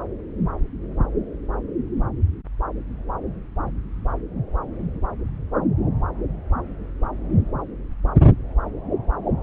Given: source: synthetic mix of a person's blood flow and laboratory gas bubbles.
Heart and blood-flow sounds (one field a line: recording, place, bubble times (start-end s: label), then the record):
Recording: Doppler ultrasound of blood flow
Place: subclavian vein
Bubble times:
no bubbles
From the record:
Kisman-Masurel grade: 000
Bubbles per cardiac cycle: 0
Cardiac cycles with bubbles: 0%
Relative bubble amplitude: no bubbles discernible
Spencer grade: 0 (complete lack of bubble signals)